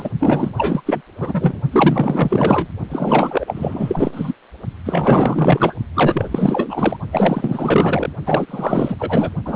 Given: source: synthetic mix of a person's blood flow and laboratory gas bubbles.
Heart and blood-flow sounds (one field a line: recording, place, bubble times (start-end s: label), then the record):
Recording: Doppler ultrasound of blood flow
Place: precordium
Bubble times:
0.00-0.10 s: bubbles
0.19-0.52 s: bubbles
0.57-0.82 s: bubbles
0.85-1.01 s: bubbles
1.20-1.60 s: bubbles
1.72-2.68 s: bubbles
2.90-4.34 s: bubbles
4.85-5.74 s: bubbles
5.95-6.96 s: bubbles
7.12-8.10 s: bubbles
8.26-8.96 s: bubbles
8.98-9.30 s: bubbles
9.45-9.56 s: bubbles
From the record:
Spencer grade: 4 (maximum detectable bubble signal sounding continuously throughout systole and diastole of every cardiac period, and overriding the amplitude of the normal cardiac signals)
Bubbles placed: only in the low amplitude regions of the cardiac cycle